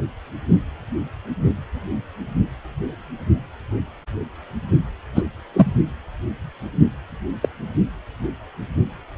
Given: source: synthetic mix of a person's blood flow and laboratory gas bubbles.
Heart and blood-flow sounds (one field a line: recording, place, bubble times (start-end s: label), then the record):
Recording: Doppler ultrasound of blood flow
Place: precordium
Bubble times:
5.15-5.22 s: bubbles
5.53-5.73 s: bubbles
7.42-7.48 s: bubbles
From the record:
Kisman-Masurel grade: 123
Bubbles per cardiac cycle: 1 to 2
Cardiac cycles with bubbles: 10 to 50%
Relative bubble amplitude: loud (0.450 to 0.775)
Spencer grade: 2 (many but less than half of the cardiac periods contain bubble signals, singularly or in groups)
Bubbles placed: only in the low amplitude regions of the cardiac cycle